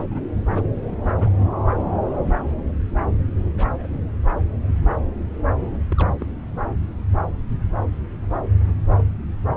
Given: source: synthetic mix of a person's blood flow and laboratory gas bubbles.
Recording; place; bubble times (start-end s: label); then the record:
Doppler ultrasound of blood flow; subclavian vein
0.00-0.06 s: bubbles
0.10-0.21 s: bubbles
0.49-0.71 s: bubbles
0.86-0.99 s: bubbles
1.04-1.36 s: bubbles
1.39-1.47 s: bubbles
3.58-4.00 s: bubbles
5.91-6.10 s: bubbles
6.20-6.26 s: bubbles
6.79-6.84 s: bubbles
From the record:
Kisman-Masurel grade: 221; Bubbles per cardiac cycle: several, 3 to 8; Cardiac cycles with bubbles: 10 to 50%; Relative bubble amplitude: barely perceptible (0.100 to 0.250); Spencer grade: 2 (many but less than half of the cardiac periods contain bubble signals, singularly or in groups); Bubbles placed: anywhere in the cardiac cycle